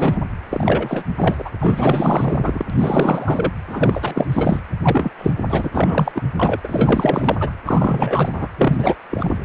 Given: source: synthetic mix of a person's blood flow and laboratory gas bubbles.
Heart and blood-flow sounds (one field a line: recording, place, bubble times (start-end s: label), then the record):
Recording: Doppler ultrasound of blood flow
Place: precordium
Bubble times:
0.00-0.20 s: bubbles
0.49-1.03 s: bubbles
1.17-1.50 s: bubbles
1.60-2.65 s: bubbles
2.69-3.53 s: bubbles
3.67-4.27 s: bubbles
4.32-4.60 s: bubbles
4.82-5.11 s: bubbles
5.18-5.33 s: bubbles
5.50-5.70 s: bubbles
5.74-6.12 s: bubbles
6.15-6.24 s: bubbles
6.36-6.61 s: bubbles
6.64-7.37 s: bubbles
7.40-7.52 s: bubbles
7.66-8.47 s: bubbles
8.57-8.95 s: bubbles
9.10-9.37 s: bubbles
From the record:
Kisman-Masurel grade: 444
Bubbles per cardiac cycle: continuous sound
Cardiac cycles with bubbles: 100%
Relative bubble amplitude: maximal (0.775 to 0.999)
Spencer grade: 4 (maximum detectable bubble signal sounding continuously throughout systole and diastole of every cardiac period, and overriding the amplitude of the normal cardiac signals)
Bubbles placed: anywhere in the cardiac cycle